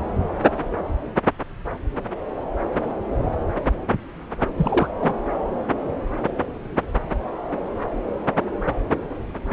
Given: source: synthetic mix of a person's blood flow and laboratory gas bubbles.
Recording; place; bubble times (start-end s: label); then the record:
Doppler ultrasound of blood flow; subclavian vein
4.56-4.88 s: bubbles
5.02-5.13 s: bubbles
From the record:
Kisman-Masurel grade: 213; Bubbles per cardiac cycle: several, 3 to 8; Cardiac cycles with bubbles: 1 to 10%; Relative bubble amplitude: loud (0.450 to 0.775); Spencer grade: 1 (occasional bubble signal discernible with the cardiac motion signal, with majority of cardiac periods free of bubbles); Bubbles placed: anywhere in the cardiac cycle